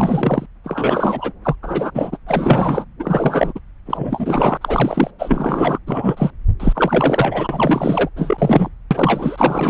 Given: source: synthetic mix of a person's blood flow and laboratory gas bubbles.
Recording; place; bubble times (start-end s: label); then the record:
Doppler ultrasound of blood flow; subclavian vein
0.00-0.46 s: bubbles
0.64-1.32 s: bubbles
1.44-1.55 s: bubbles
1.62-1.91 s: bubbles
1.94-2.17 s: bubbles
2.27-2.85 s: bubbles
3.00-3.60 s: bubbles
3.86-4.58 s: bubbles
4.61-5.11 s: bubbles
5.18-5.79 s: bubbles
5.87-6.30 s: bubbles
6.59-8.09 s: bubbles
8.16-8.69 s: bubbles
8.90-9.70 s: bubbles
From the record:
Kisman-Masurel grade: 343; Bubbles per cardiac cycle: rolling drumbeat, 9 or more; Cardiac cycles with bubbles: 100%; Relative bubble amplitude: loud (0.450 to 0.775); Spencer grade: 3 (all of the cardiac periods contain showers or single bubble signals, but not dominating or overriding the cardiac motion signals); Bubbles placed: anywhere in the cardiac cycle